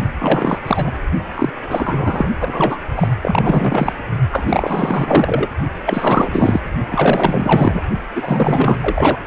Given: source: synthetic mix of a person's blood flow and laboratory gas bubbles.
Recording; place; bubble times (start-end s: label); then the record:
Doppler ultrasound of blood flow; precordium
0.19-0.59 s: bubbles
0.65-0.91 s: bubbles
1.34-1.50 s: bubbles
1.69-2.29 s: bubbles
2.39-2.79 s: bubbles
2.96-3.13 s: bubbles
3.22-3.92 s: bubbles
4.31-5.48 s: bubbles
5.85-6.60 s: bubbles
6.91-7.83 s: bubbles
8.15-8.77 s: bubbles
8.81-9.19 s: bubbles
From the record:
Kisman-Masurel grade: 444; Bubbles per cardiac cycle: continuous sound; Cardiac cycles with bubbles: 100%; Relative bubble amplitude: maximal (0.775 to 0.999); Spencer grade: 4 (maximum detectable bubble signal sounding continuously throughout systole and diastole of every cardiac period, and overriding the amplitude of the normal cardiac signals); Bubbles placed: only in the low amplitude regions of the cardiac cycle